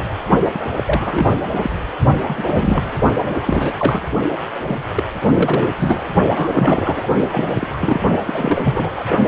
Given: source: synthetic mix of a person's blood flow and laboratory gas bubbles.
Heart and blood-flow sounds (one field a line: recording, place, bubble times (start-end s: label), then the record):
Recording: Doppler ultrasound of blood flow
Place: precordium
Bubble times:
0.00-0.05 s: bubbles
0.54-0.65 s: bubbles
0.77-1.31 s: bubbles
1.53-1.71 s: bubbles
2.27-2.94 s: bubbles
3.25-3.35 s: bubbles
3.46-3.76 s: bubbles
3.79-4.08 s: bubbles
4.67-4.79 s: bubbles
4.94-5.03 s: bubbles
5.28-5.69 s: bubbles
5.77-6.03 s: bubbles
6.34-7.07 s: bubbles
7.31-7.67 s: bubbles
7.73-8.00 s: bubbles
8.26-8.89 s: bubbles
8.95-9.06 s: bubbles
From the record:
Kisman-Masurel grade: 342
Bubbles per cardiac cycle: rolling drumbeat, 9 or more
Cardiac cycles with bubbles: 100%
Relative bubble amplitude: moderate (0.250 to 0.450)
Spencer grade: 3 (all of the cardiac periods contain showers or single bubble signals, but not dominating or overriding the cardiac motion signals)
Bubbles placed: only in the low amplitude regions of the cardiac cycle